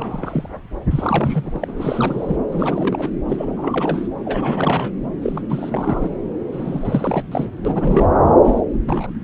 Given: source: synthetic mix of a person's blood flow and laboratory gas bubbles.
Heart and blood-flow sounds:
Doppler ultrasound of blood flow; subclavian vein
0.00-0.49 s: bubbles
0.91-2.36 s: bubbles
2.52-3.10 s: bubbles
3.28-4.08 s: bubbles
4.25-4.92 s: bubbles
5.22-5.42 s: bubbles
5.50-6.10 s: bubbles
6.52-7.25 s: bubbles
7.31-7.50 s: bubbles
7.65-8.07 s: bubbles
8.44-8.61 s: bubbles
8.86-9.13 s: bubbles
From the record:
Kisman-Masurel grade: 342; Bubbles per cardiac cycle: rolling drumbeat, 9 or more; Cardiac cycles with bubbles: 100%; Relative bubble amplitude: moderate (0.250 to 0.450); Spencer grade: 3 (all of the cardiac periods contain showers or single bubble signals, but not dominating or overriding the cardiac motion signals); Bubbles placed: anywhere in the cardiac cycle

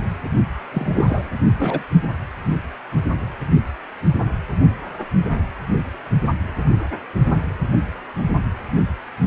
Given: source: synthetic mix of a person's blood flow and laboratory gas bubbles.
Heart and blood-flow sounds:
Doppler ultrasound of blood flow; precordium
0.72-1.30 s: bubbles
1.59-1.84 s: bubbles
From the record:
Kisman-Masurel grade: 222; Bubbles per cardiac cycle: several, 3 to 8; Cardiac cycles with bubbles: 10 to 50%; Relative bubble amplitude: moderate (0.250 to 0.450); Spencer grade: 2 (many but less than half of the cardiac periods contain bubble signals, singularly or in groups); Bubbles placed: only in the low amplitude regions of the cardiac cycle

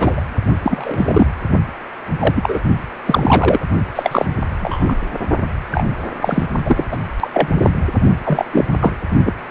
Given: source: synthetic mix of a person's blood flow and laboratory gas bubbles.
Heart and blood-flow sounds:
Doppler ultrasound of blood flow; precordium
0.00-0.21 s: bubbles
0.64-1.26 s: bubbles
2.19-2.60 s: bubbles
3.06-3.59 s: bubbles
3.95-4.25 s: bubbles
4.61-4.95 s: bubbles
5.71-5.87 s: bubbles
6.21-6.46 s: bubbles
6.65-6.84 s: bubbles
6.91-6.97 s: bubbles
7.20-7.28 s: bubbles
7.33-7.48 s: bubbles
7.62-7.71 s: bubbles
8.25-8.45 s: bubbles
8.52-8.65 s: bubbles
8.79-8.93 s: bubbles
9.25-9.32 s: bubbles
From the record:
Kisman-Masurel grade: 243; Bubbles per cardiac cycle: several, 3 to 8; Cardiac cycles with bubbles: 100%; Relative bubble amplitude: loud (0.450 to 0.775); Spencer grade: 3 (all of the cardiac periods contain showers or single bubble signals, but not dominating or overriding the cardiac motion signals); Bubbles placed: only in the low amplitude regions of the cardiac cycle

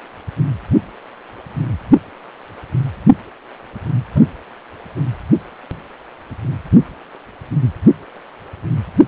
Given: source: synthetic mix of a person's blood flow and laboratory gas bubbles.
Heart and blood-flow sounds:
Doppler ultrasound of blood flow; precordium
4.15-4.21 s: bubbles
From the record:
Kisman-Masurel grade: 112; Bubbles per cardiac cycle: 1 to 2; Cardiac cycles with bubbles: 1 to 10%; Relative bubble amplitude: moderate (0.250 to 0.450); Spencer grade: 1 (occasional bubble signal discernible with the cardiac motion signal, with majority of cardiac periods free of bubbles); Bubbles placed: only in the low amplitude regions of the cardiac cycle

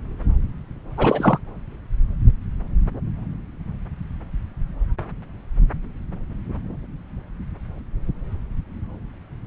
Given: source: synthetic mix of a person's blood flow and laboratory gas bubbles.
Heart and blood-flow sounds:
Doppler ultrasound of blood flow; subclavian vein
0.97-1.39 s: bubbles
From the record:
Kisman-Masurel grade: 212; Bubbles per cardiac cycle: several, 3 to 8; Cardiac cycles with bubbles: 1 to 10%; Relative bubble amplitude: moderate (0.250 to 0.450); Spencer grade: 1 (occasional bubble signal discernible with the cardiac motion signal, with majority of cardiac periods free of bubbles); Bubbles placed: anywhere in the cardiac cycle

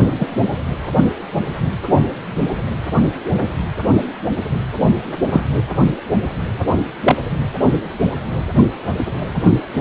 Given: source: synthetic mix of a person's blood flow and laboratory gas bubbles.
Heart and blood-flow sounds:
Doppler ultrasound of blood flow; precordium
0.19-0.27 s: bubbles
5.31-5.41 s: bubbles
7.04-7.16 s: bubbles
From the record:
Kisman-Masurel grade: 123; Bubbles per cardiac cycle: 1 to 2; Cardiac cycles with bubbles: 10 to 50%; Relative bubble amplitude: loud (0.450 to 0.775); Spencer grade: 2 (many but less than half of the cardiac periods contain bubble signals, singularly or in groups); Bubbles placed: anywhere in the cardiac cycle

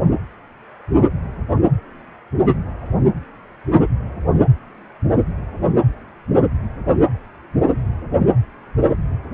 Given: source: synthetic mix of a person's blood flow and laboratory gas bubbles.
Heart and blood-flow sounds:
Doppler ultrasound of blood flow; precordium
no bubbles
From the record:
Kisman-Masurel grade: 000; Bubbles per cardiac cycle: 0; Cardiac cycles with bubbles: 0%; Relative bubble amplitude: no bubbles discernible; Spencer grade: 0 (complete lack of bubble signals)

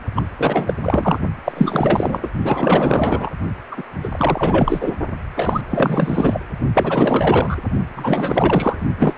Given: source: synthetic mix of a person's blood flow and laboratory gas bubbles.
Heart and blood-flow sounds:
Doppler ultrasound of blood flow; precordium
0.15-0.22 s: bubbles
0.39-0.75 s: bubbles
0.82-1.19 s: bubbles
1.44-2.29 s: bubbles
2.42-3.30 s: bubbles
3.71-3.83 s: bubbles
4.03-4.09 s: bubbles
4.12-4.94 s: bubbles
5.34-5.61 s: bubbles
5.70-6.40 s: bubbles
6.74-7.56 s: bubbles
7.94-8.82 s: bubbles
8.98-9.18 s: bubbles
From the record:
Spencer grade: 4 (maximum detectable bubble signal sounding continuously throughout systole and diastole of every cardiac period, and overriding the amplitude of the normal cardiac signals); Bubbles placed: only in the low amplitude regions of the cardiac cycle

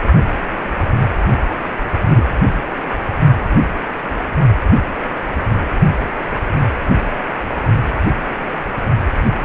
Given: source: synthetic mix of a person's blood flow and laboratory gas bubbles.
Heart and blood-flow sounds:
Doppler ultrasound of blood flow; precordium
1.90-2.28 s: bubbles
From the record:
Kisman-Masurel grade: 112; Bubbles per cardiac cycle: 1 to 2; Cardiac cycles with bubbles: 1 to 10%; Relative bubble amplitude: moderate (0.250 to 0.450); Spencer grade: 1 (occasional bubble signal discernible with the cardiac motion signal, with majority of cardiac periods free of bubbles); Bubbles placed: only in the low amplitude regions of the cardiac cycle

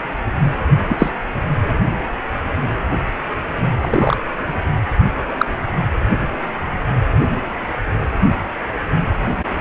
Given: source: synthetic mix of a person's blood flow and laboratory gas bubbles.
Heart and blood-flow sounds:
Doppler ultrasound of blood flow; precordium
0.88-1.10 s: bubbles
3.81-4.16 s: bubbles
5.38-5.46 s: bubbles
From the record:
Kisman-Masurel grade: 123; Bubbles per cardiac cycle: 1 to 2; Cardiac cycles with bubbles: 10 to 50%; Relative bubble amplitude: loud (0.450 to 0.775); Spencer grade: 2 (many but less than half of the cardiac periods contain bubble signals, singularly or in groups); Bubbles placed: anywhere in the cardiac cycle

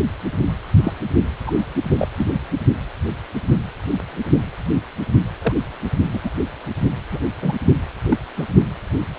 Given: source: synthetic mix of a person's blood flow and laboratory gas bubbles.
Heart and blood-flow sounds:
Doppler ultrasound of blood flow; precordium
0.83-0.94 s: bubbles
1.46-1.52 s: bubbles
1.98-2.08 s: bubbles
2.17-2.30 s: bubbles
5.42-5.53 s: bubbles
6.13-6.19 s: bubbles
6.24-6.30 s: bubbles
7.11-7.19 s: bubbles
7.42-7.53 s: bubbles
8.09-8.18 s: bubbles
8.37-8.44 s: bubbles
From the record:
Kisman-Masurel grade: 122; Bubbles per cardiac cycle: 1 to 2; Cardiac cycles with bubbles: 10 to 50%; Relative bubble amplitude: moderate (0.250 to 0.450); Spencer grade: 2 (many but less than half of the cardiac periods contain bubble signals, singularly or in groups); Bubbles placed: only in the low amplitude regions of the cardiac cycle

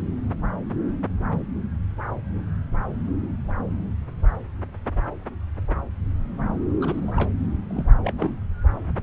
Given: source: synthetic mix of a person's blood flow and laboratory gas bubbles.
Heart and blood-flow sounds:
Doppler ultrasound of blood flow; subclavian vein
6.81-7.31 s: bubbles
7.69-7.83 s: bubbles
8.02-8.12 s: bubbles
8.18-8.34 s: bubbles
From the record:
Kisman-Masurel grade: 221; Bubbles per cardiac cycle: several, 3 to 8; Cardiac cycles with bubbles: 10 to 50%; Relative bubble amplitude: barely perceptible (0.100 to 0.250); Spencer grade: 2 (many but less than half of the cardiac periods contain bubble signals, singularly or in groups); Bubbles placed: anywhere in the cardiac cycle

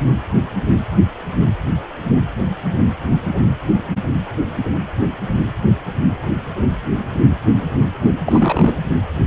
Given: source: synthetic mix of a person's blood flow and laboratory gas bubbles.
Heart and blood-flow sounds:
Doppler ultrasound of blood flow; precordium
8.24-8.76 s: bubbles
From the record:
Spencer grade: 1 (occasional bubble signal discernible with the cardiac motion signal, with majority of cardiac periods free of bubbles); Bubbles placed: anywhere in the cardiac cycle

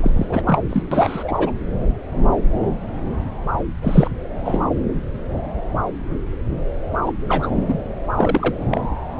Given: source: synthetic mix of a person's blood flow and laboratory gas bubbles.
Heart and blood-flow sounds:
Doppler ultrasound of blood flow; subclavian vein
0.01-0.26 s: bubbles
0.29-0.41 s: bubbles
0.47-0.61 s: bubbles
0.70-0.82 s: bubbles
0.91-1.53 s: bubbles
3.82-4.11 s: bubbles
4.45-4.61 s: bubbles
7.06-7.13 s: bubbles
7.28-7.78 s: bubbles
8.17-8.63 s: bubbles
8.71-8.81 s: bubbles
From the record:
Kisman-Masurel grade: 233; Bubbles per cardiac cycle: several, 3 to 8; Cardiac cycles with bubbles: 50 to 99%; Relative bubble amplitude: loud (0.450 to 0.775); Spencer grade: 3 (all of the cardiac periods contain showers or single bubble signals, but not dominating or overriding the cardiac motion signals); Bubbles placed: anywhere in the cardiac cycle

